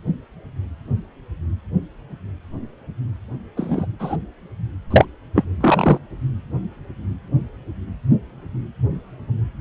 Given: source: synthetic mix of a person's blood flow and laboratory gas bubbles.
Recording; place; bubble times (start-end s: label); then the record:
Doppler ultrasound of blood flow; precordium
3.56-3.85 s: bubbles
3.99-4.17 s: bubbles
4.91-5.05 s: bubbles
5.35-5.44 s: bubbles
5.60-5.98 s: bubbles
From the record:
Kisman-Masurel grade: 123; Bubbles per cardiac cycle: 1 to 2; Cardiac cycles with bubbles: 10 to 50%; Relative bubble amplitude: loud (0.450 to 0.775); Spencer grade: 2 (many but less than half of the cardiac periods contain bubble signals, singularly or in groups); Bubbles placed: anywhere in the cardiac cycle